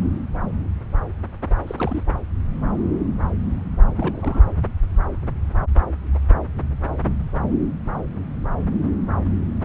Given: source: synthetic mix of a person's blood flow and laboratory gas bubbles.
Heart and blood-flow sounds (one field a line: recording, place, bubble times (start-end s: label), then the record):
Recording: Doppler ultrasound of blood flow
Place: subclavian vein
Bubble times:
1.67-2.02 s: bubbles
3.97-4.42 s: bubbles
From the record:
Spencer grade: 2 (many but less than half of the cardiac periods contain bubble signals, singularly or in groups)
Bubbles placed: anywhere in the cardiac cycle